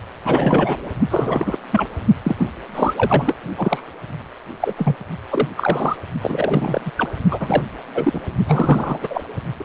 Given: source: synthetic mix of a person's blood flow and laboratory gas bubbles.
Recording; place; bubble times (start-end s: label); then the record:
Doppler ultrasound of blood flow; precordium
0.25-0.90 s: bubbles
1.10-1.57 s: bubbles
1.71-1.89 s: bubbles
2.24-2.47 s: bubbles
2.75-2.94 s: bubbles
2.97-3.34 s: bubbles
3.57-3.83 s: bubbles
4.60-4.96 s: bubbles
5.31-5.49 s: bubbles
5.57-5.96 s: bubbles
6.21-6.81 s: bubbles
6.85-6.91 s: bubbles
6.96-7.08 s: bubbles
7.31-7.63 s: bubbles
7.94-8.21 s: bubbles
8.47-9.24 s: bubbles
9.58-9.65 s: bubbles
From the record:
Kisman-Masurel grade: 343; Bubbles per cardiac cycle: rolling drumbeat, 9 or more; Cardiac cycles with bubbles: 100%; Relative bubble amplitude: loud (0.450 to 0.775); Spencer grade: 3 (all of the cardiac periods contain showers or single bubble signals, but not dominating or overriding the cardiac motion signals); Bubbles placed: only in the low amplitude regions of the cardiac cycle